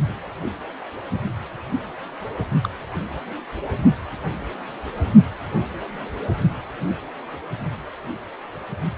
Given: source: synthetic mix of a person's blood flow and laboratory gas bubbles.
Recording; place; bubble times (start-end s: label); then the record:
Doppler ultrasound of blood flow; precordium
2.63-2.68 s: bubbles
From the record:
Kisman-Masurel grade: 111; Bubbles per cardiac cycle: 1 to 2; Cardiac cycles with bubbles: 1 to 10%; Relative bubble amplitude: barely perceptible (0.100 to 0.250); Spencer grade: 1 (occasional bubble signal discernible with the cardiac motion signal, with majority of cardiac periods free of bubbles); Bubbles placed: only in the low amplitude regions of the cardiac cycle